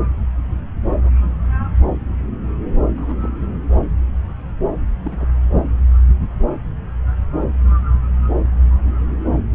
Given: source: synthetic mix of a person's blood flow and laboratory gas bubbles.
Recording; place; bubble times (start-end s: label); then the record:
Doppler ultrasound of blood flow; subclavian vein
2.97-3.14 s: bubbles
3.22-3.33 s: bubbles
5.04-5.25 s: bubbles
5.65-5.72 s: bubbles
From the record:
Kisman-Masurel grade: 121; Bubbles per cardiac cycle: 1 to 2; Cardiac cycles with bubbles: 10 to 50%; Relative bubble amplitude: barely perceptible (0.100 to 0.250); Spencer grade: 2 (many but less than half of the cardiac periods contain bubble signals, singularly or in groups); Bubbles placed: anywhere in the cardiac cycle